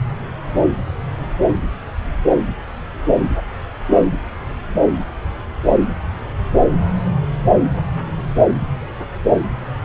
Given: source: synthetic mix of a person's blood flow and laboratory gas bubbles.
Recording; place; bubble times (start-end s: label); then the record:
Doppler ultrasound of blood flow; subclavian vein
no bubbles
From the record:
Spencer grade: 0 (complete lack of bubble signals)